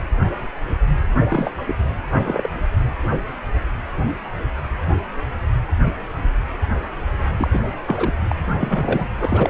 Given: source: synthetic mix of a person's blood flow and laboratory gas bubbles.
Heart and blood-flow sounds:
Doppler ultrasound of blood flow; precordium
1.29-1.51 s: bubbles
1.67-1.75 s: bubbles
2.10-2.48 s: bubbles
7.37-7.60 s: bubbles
7.87-8.13 s: bubbles
8.29-8.35 s: bubbles
8.58-9.07 s: bubbles
9.17-9.50 s: bubbles
From the record:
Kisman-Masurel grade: 222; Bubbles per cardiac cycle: several, 3 to 8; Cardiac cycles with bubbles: 10 to 50%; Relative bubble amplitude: moderate (0.250 to 0.450); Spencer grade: 2 (many but less than half of the cardiac periods contain bubble signals, singularly or in groups); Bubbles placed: anywhere in the cardiac cycle

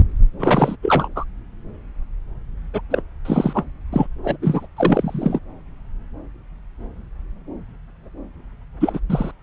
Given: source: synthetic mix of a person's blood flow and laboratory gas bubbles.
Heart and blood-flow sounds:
Doppler ultrasound of blood flow; subclavian vein
0.39-0.76 s: bubbles
0.82-1.08 s: bubbles
1.16-1.24 s: bubbles
2.73-2.81 s: bubbles
2.90-3.02 s: bubbles
3.25-3.64 s: bubbles
3.92-4.06 s: bubbles
4.24-4.37 s: bubbles
4.42-4.66 s: bubbles
4.76-5.39 s: bubbles
8.81-9.00 s: bubbles
9.09-9.31 s: bubbles
From the record:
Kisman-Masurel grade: 332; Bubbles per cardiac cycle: rolling drumbeat, 9 or more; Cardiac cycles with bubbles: 50 to 99%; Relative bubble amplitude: moderate (0.250 to 0.450); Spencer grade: 3 (all of the cardiac periods contain showers or single bubble signals, but not dominating or overriding the cardiac motion signals); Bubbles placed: anywhere in the cardiac cycle

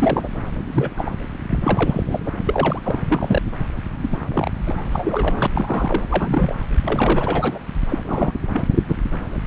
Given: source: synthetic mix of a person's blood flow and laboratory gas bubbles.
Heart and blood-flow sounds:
Doppler ultrasound of blood flow; subclavian vein
0.00-0.29 s: bubbles
0.71-0.90 s: bubbles
0.96-1.12 s: bubbles
1.49-1.58 s: bubbles
1.64-2.20 s: bubbles
2.25-2.31 s: bubbles
2.46-3.02 s: bubbles
3.08-3.42 s: bubbles
4.00-4.18 s: bubbles
4.33-4.51 s: bubbles
4.66-4.89 s: bubbles
4.92-5.47 s: bubbles
5.55-6.04 s: bubbles
6.09-6.55 s: bubbles
6.83-7.59 s: bubbles
7.89-7.99 s: bubbles
8.06-8.32 s: bubbles
8.53-8.64 s: bubbles
8.74-8.83 s: bubbles
8.88-8.95 s: bubbles
From the record:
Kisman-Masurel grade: 242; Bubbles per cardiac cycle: several, 3 to 8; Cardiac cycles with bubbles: 100%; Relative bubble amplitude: moderate (0.250 to 0.450); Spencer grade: 3 (all of the cardiac periods contain showers or single bubble signals, but not dominating or overriding the cardiac motion signals); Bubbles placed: anywhere in the cardiac cycle

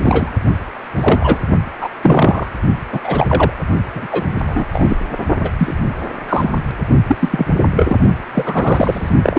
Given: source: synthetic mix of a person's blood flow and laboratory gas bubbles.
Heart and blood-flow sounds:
Doppler ultrasound of blood flow; precordium
0.02-0.31 s: bubbles
0.96-1.39 s: bubbles
1.80-1.89 s: bubbles
2.02-2.47 s: bubbles
2.92-2.99 s: bubbles
3.04-3.54 s: bubbles
3.94-4.08 s: bubbles
4.11-4.67 s: bubbles
4.72-4.97 s: bubbles
5.41-5.50 s: bubbles
5.58-5.74 s: bubbles
6.28-6.54 s: bubbles
7.07-7.46 s: bubbles
7.76-7.97 s: bubbles
8.34-9.10 s: bubbles
9.22-9.39 s: bubbles
From the record:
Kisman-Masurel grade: 243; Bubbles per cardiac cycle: several, 3 to 8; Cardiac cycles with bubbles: 100%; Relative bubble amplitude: loud (0.450 to 0.775); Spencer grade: 3 (all of the cardiac periods contain showers or single bubble signals, but not dominating or overriding the cardiac motion signals); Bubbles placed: only in the low amplitude regions of the cardiac cycle

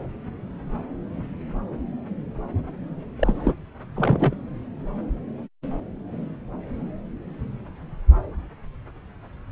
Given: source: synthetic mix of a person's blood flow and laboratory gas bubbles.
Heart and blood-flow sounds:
Doppler ultrasound of blood flow; subclavian vein
3.19-3.54 s: bubbles
3.96-4.34 s: bubbles
From the record:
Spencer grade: 1 (occasional bubble signal discernible with the cardiac motion signal, with majority of cardiac periods free of bubbles); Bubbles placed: anywhere in the cardiac cycle

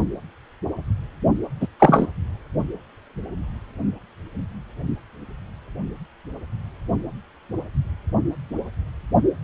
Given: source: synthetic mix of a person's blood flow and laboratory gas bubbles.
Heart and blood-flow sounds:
Doppler ultrasound of blood flow; precordium
1.60-1.67 s: bubbles
1.79-2.07 s: bubbles
From the record:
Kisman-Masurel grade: 113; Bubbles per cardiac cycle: 1 to 2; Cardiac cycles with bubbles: 1 to 10%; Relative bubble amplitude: loud (0.450 to 0.775); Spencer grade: 1 (occasional bubble signal discernible with the cardiac motion signal, with majority of cardiac periods free of bubbles); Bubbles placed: only in the low amplitude regions of the cardiac cycle

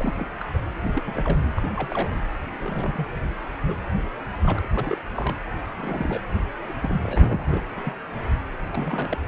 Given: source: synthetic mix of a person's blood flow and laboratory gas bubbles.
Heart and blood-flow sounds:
Doppler ultrasound of blood flow; precordium
0.00-0.29 s: bubbles
0.40-0.45 s: bubbles
0.53-0.58 s: bubbles
0.84-1.02 s: bubbles
1.05-1.40 s: bubbles
1.56-1.69 s: bubbles
1.75-2.25 s: bubbles
2.61-3.07 s: bubbles
3.67-3.77 s: bubbles
4.43-4.68 s: bubbles
4.76-4.97 s: bubbles
5.15-5.37 s: bubbles
5.76-6.21 s: bubbles
6.68-6.73 s: bubbles
6.80-6.96 s: bubbles
7.03-7.63 s: bubbles
7.76-7.93 s: bubbles
8.71-9.18 s: bubbles
From the record:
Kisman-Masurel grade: 242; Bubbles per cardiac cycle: several, 3 to 8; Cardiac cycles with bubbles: 100%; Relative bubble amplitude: moderate (0.250 to 0.450); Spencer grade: 3 (all of the cardiac periods contain showers or single bubble signals, but not dominating or overriding the cardiac motion signals); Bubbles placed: anywhere in the cardiac cycle

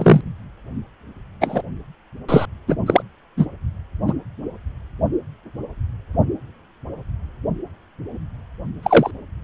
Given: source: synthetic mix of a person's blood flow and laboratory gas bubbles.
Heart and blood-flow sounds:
Doppler ultrasound of blood flow; precordium
0.00-0.21 s: bubbles
1.41-1.62 s: bubbles
2.28-2.46 s: bubbles
2.67-2.75 s: bubbles
2.86-3.02 s: bubbles
3.37-3.46 s: bubbles
4.07-4.14 s: bubbles
8.83-9.11 s: bubbles
From the record:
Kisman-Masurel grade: 123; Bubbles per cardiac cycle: 1 to 2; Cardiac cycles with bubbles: 10 to 50%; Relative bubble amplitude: loud (0.450 to 0.775); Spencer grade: 2 (many but less than half of the cardiac periods contain bubble signals, singularly or in groups); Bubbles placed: only in the low amplitude regions of the cardiac cycle

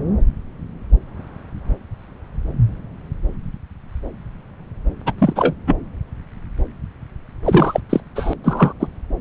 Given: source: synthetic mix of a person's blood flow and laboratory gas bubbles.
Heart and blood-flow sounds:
Doppler ultrasound of blood flow; subclavian vein
5.06-5.12 s: bubbles
5.18-5.54 s: bubbles
5.67-5.77 s: bubbles
7.44-7.80 s: bubbles
7.89-8.01 s: bubbles
8.16-8.34 s: bubbles
8.44-8.73 s: bubbles
8.80-8.88 s: bubbles
From the record:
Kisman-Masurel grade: 223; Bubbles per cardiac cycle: several, 3 to 8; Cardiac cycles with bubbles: 10 to 50%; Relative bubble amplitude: loud (0.450 to 0.775); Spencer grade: 2 (many but less than half of the cardiac periods contain bubble signals, singularly or in groups); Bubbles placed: anywhere in the cardiac cycle

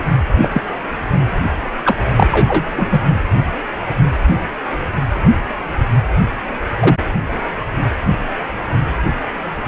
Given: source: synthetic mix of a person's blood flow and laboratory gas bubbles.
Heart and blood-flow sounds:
Doppler ultrasound of blood flow; precordium
0.42-0.62 s: bubbles
1.84-1.97 s: bubbles
2.10-2.28 s: bubbles
2.31-2.65 s: bubbles
2.73-3.05 s: bubbles
6.80-6.97 s: bubbles
From the record:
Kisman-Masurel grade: 123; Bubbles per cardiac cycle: 1 to 2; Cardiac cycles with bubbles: 10 to 50%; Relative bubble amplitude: loud (0.450 to 0.775); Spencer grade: 2 (many but less than half of the cardiac periods contain bubble signals, singularly or in groups); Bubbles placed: anywhere in the cardiac cycle

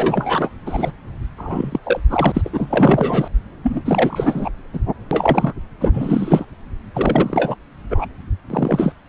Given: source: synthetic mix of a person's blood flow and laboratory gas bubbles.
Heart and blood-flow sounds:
Doppler ultrasound of blood flow; subclavian vein
0.00-0.49 s: bubbles
0.65-0.91 s: bubbles
1.38-1.79 s: bubbles
1.83-2.00 s: bubbles
2.10-3.28 s: bubbles
3.63-3.82 s: bubbles
3.85-4.51 s: bubbles
4.73-4.79 s: bubbles
5.11-5.53 s: bubbles
5.80-6.46 s: bubbles
6.94-7.55 s: bubbles
7.90-8.05 s: bubbles
8.50-8.93 s: bubbles
From the record:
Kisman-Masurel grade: 343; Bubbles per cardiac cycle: rolling drumbeat, 9 or more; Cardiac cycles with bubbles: 100%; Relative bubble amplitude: loud (0.450 to 0.775); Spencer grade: 3 (all of the cardiac periods contain showers or single bubble signals, but not dominating or overriding the cardiac motion signals); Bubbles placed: anywhere in the cardiac cycle

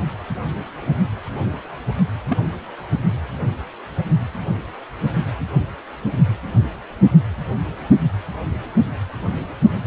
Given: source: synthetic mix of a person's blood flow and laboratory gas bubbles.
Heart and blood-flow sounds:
Doppler ultrasound of blood flow; precordium
2.29-2.37 s: bubbles
From the record:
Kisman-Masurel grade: 112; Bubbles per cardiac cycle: 1 to 2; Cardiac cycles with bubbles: 1 to 10%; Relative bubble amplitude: moderate (0.250 to 0.450); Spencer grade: 1 (occasional bubble signal discernible with the cardiac motion signal, with majority of cardiac periods free of bubbles); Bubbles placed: only in the low amplitude regions of the cardiac cycle

